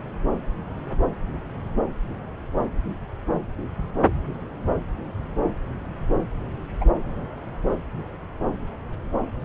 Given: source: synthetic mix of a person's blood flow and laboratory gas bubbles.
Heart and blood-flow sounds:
Doppler ultrasound of blood flow; subclavian vein
6.80-6.86 s: bubbles
From the record:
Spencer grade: 1 (occasional bubble signal discernible with the cardiac motion signal, with majority of cardiac periods free of bubbles); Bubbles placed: anywhere in the cardiac cycle

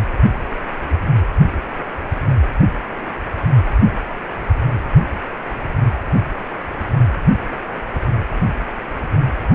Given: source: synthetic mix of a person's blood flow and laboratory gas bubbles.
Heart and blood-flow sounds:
Doppler ultrasound of blood flow; precordium
no bubbles
From the record:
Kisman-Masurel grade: 000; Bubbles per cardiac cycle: 0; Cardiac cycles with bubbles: 0%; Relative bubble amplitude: no bubbles discernible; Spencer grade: 0 (complete lack of bubble signals)

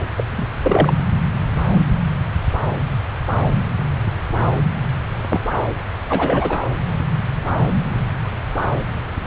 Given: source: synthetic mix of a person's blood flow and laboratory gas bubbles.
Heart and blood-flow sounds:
Doppler ultrasound of blood flow; subclavian vein
0.18-0.24 s: bubbles
0.31-0.47 s: bubbles
0.64-0.94 s: bubbles
5.29-5.41 s: bubbles
6.08-6.58 s: bubbles
From the record:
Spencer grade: 2 (many but less than half of the cardiac periods contain bubble signals, singularly or in groups); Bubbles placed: anywhere in the cardiac cycle

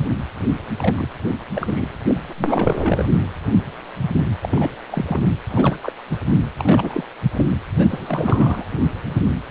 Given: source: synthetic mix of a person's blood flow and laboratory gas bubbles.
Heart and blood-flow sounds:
Doppler ultrasound of blood flow; precordium
0.78-1.07 s: bubbles
1.54-1.98 s: bubbles
2.08-2.17 s: bubbles
2.29-3.04 s: bubbles
4.41-4.71 s: bubbles
4.89-5.22 s: bubbles
5.49-5.79 s: bubbles
5.83-5.92 s: bubbles
6.09-6.16 s: bubbles
6.58-7.04 s: bubbles
7.35-7.46 s: bubbles
7.78-7.87 s: bubbles
7.89-8.65 s: bubbles
From the record:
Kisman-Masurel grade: 332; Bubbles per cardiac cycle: rolling drumbeat, 9 or more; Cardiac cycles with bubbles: 50 to 99%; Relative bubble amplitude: moderate (0.250 to 0.450); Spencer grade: 3 (all of the cardiac periods contain showers or single bubble signals, but not dominating or overriding the cardiac motion signals); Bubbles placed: anywhere in the cardiac cycle

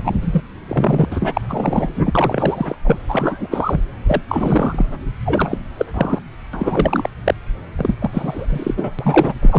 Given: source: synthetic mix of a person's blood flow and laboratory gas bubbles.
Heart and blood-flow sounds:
Doppler ultrasound of blood flow; subclavian vein
0.04-0.17 s: bubbles
0.22-0.43 s: bubbles
0.69-1.05 s: bubbles
1.11-1.41 s: bubbles
1.49-1.89 s: bubbles
1.96-2.12 s: bubbles
2.15-2.75 s: bubbles
2.84-2.98 s: bubbles
3.08-3.80 s: bubbles
4.06-4.21 s: bubbles
4.28-4.86 s: bubbles
5.25-5.59 s: bubbles
5.77-5.86 s: bubbles
5.94-6.18 s: bubbles
6.53-7.09 s: bubbles
7.25-7.34 s: bubbles
7.78-7.95 s: bubbles
7.99-8.46 s: bubbles
8.48-8.93 s: bubbles
8.98-9.33 s: bubbles
9.42-9.59 s: bubbles
From the record:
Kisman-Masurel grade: 343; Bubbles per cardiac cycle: rolling drumbeat, 9 or more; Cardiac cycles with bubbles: 100%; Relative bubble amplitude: loud (0.450 to 0.775); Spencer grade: 3 (all of the cardiac periods contain showers or single bubble signals, but not dominating or overriding the cardiac motion signals); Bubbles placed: anywhere in the cardiac cycle

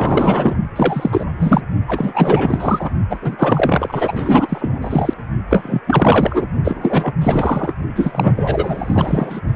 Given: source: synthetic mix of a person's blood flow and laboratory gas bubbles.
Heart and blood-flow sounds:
Doppler ultrasound of blood flow; precordium
0.00-0.57 s: bubbles
0.76-1.26 s: bubbles
1.38-1.62 s: bubbles
1.88-2.90 s: bubbles
3.09-3.18 s: bubbles
3.21-5.13 s: bubbles
5.50-5.80 s: bubbles
5.87-6.46 s: bubbles
6.64-7.13 s: bubbles
7.21-7.73 s: bubbles
7.95-9.41 s: bubbles
From the record:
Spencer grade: 4 (maximum detectable bubble signal sounding continuously throughout systole and diastole of every cardiac period, and overriding the amplitude of the normal cardiac signals); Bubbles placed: only in the low amplitude regions of the cardiac cycle

